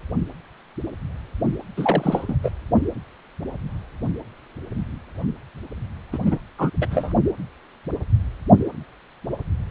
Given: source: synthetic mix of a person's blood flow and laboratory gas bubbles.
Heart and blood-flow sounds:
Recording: Doppler ultrasound of blood flow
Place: precordium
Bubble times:
1.77-2.36 s: bubbles
2.43-2.50 s: bubbles
6.12-6.18 s: bubbles
6.24-6.38 s: bubbles
6.58-6.70 s: bubbles
6.81-6.86 s: bubbles
6.90-7.14 s: bubbles
From the record:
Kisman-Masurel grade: 222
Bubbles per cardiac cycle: several, 3 to 8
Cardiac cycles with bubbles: 10 to 50%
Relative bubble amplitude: moderate (0.250 to 0.450)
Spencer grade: 2 (many but less than half of the cardiac periods contain bubble signals, singularly or in groups)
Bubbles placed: anywhere in the cardiac cycle

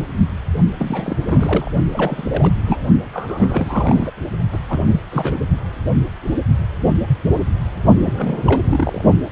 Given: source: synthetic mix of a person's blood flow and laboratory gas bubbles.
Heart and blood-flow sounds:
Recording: Doppler ultrasound of blood flow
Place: precordium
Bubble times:
0.79-1.17 s: bubbles
1.25-1.71 s: bubbles
1.92-2.53 s: bubbles
2.66-2.83 s: bubbles
3.13-4.11 s: bubbles
4.51-4.59 s: bubbles
4.69-5.00 s: bubbles
5.11-5.36 s: bubbles
7.97-8.14 s: bubbles
8.17-8.37 s: bubbles
8.46-8.62 s: bubbles
8.70-9.05 s: bubbles
From the record:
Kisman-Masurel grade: 332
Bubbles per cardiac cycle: rolling drumbeat, 9 or more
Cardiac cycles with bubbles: 50 to 99%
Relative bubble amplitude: moderate (0.250 to 0.450)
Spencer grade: 3 (all of the cardiac periods contain showers or single bubble signals, but not dominating or overriding the cardiac motion signals)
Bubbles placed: only in the low amplitude regions of the cardiac cycle

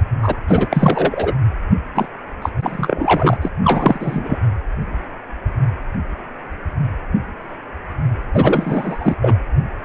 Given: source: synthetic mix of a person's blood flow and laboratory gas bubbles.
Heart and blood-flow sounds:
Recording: Doppler ultrasound of blood flow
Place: precordium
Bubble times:
0.22-0.35 s: bubbles
0.47-0.67 s: bubbles
0.70-1.33 s: bubbles
1.95-2.10 s: bubbles
2.42-2.50 s: bubbles
2.62-3.38 s: bubbles
3.42-3.48 s: bubbles
3.64-4.38 s: bubbles
8.33-9.15 s: bubbles
9.21-9.38 s: bubbles
From the record:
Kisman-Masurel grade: 333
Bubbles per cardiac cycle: rolling drumbeat, 9 or more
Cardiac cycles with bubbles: 50 to 99%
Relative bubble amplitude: loud (0.450 to 0.775)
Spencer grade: 3 (all of the cardiac periods contain showers or single bubble signals, but not dominating or overriding the cardiac motion signals)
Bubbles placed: anywhere in the cardiac cycle

